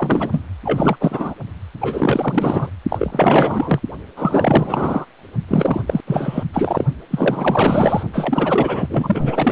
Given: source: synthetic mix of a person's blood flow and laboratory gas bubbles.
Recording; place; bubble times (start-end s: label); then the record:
Doppler ultrasound of blood flow; precordium
0.00-0.43 s: bubbles
0.64-0.97 s: bubbles
1.00-1.35 s: bubbles
1.81-2.69 s: bubbles
2.88-3.80 s: bubbles
4.17-5.06 s: bubbles
5.48-5.83 s: bubbles
5.87-6.00 s: bubbles
6.07-6.44 s: bubbles
6.53-6.85 s: bubbles
7.11-8.03 s: bubbles
8.12-9.52 s: bubbles
From the record:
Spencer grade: 4 (maximum detectable bubble signal sounding continuously throughout systole and diastole of every cardiac period, and overriding the amplitude of the normal cardiac signals); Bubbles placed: only in the low amplitude regions of the cardiac cycle